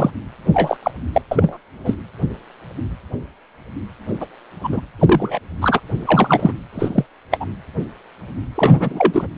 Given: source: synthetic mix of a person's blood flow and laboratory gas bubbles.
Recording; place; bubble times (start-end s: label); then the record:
Doppler ultrasound of blood flow; precordium
0.00-0.10 s: bubbles
0.53-0.77 s: bubbles
0.83-0.91 s: bubbles
1.12-1.21 s: bubbles
1.31-1.57 s: bubbles
1.84-1.95 s: bubbles
4.20-4.26 s: bubbles
4.63-4.80 s: bubbles
4.99-5.39 s: bubbles
5.61-5.80 s: bubbles
6.05-6.53 s: bubbles
6.73-7.06 s: bubbles
7.31-7.38 s: bubbles
7.40-7.46 s: bubbles
8.54-9.27 s: bubbles
From the record:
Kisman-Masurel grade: 233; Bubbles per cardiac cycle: several, 3 to 8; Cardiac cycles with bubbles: 50 to 99%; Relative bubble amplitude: loud (0.450 to 0.775); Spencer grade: 3 (all of the cardiac periods contain showers or single bubble signals, but not dominating or overriding the cardiac motion signals); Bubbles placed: anywhere in the cardiac cycle